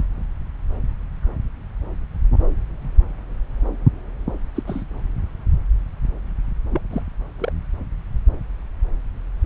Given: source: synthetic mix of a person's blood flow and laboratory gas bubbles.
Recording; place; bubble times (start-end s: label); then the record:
Doppler ultrasound of blood flow; subclavian vein
4.54-4.62 s: bubbles
4.67-4.83 s: bubbles
6.71-6.82 s: bubbles
6.90-7.02 s: bubbles
7.38-7.53 s: bubbles
From the record:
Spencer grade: 2 (many but less than half of the cardiac periods contain bubble signals, singularly or in groups); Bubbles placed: anywhere in the cardiac cycle